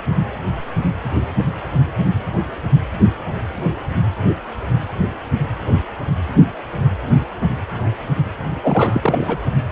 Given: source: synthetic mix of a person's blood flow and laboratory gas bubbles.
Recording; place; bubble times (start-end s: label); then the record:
Doppler ultrasound of blood flow; precordium
8.63-9.38 s: bubbles
From the record:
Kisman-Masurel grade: 223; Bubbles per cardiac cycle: several, 3 to 8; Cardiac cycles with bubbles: 10 to 50%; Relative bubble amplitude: loud (0.450 to 0.775); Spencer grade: 2 (many but less than half of the cardiac periods contain bubble signals, singularly or in groups); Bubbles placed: only in the low amplitude regions of the cardiac cycle